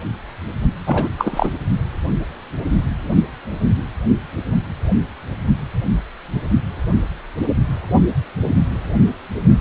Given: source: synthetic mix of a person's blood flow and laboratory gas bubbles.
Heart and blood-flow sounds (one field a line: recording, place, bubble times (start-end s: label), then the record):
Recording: Doppler ultrasound of blood flow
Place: precordium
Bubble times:
0.86-1.09 s: bubbles
1.18-1.51 s: bubbles
From the record:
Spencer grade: 1 (occasional bubble signal discernible with the cardiac motion signal, with majority of cardiac periods free of bubbles)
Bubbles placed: anywhere in the cardiac cycle